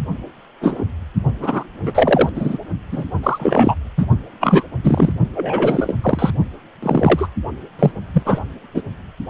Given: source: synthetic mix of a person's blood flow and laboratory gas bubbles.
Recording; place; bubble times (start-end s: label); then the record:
Doppler ultrasound of blood flow; precordium
0.61-0.84 s: bubbles
1.40-1.64 s: bubbles
1.83-2.29 s: bubbles
2.35-2.58 s: bubbles
2.92-3.04 s: bubbles
3.23-3.75 s: bubbles
3.97-4.06 s: bubbles
4.40-4.63 s: bubbles
4.83-5.12 s: bubbles
5.34-5.95 s: bubbles
6.03-6.30 s: bubbles
6.83-7.27 s: bubbles
7.79-7.91 s: bubbles
8.13-8.39 s: bubbles
8.74-8.83 s: bubbles
From the record:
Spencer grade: 3 (all of the cardiac periods contain showers or single bubble signals, but not dominating or overriding the cardiac motion signals); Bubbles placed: only in the low amplitude regions of the cardiac cycle